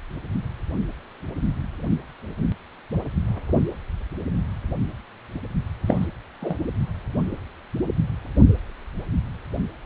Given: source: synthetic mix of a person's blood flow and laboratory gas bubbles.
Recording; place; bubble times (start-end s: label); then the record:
Doppler ultrasound of blood flow; precordium
5.87-6.06 s: bubbles
6.41-6.58 s: bubbles
From the record:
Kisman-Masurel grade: 212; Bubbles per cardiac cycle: several, 3 to 8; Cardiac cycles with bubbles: 1 to 10%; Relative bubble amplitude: moderate (0.250 to 0.450); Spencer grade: 1 (occasional bubble signal discernible with the cardiac motion signal, with majority of cardiac periods free of bubbles); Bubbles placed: only in the low amplitude regions of the cardiac cycle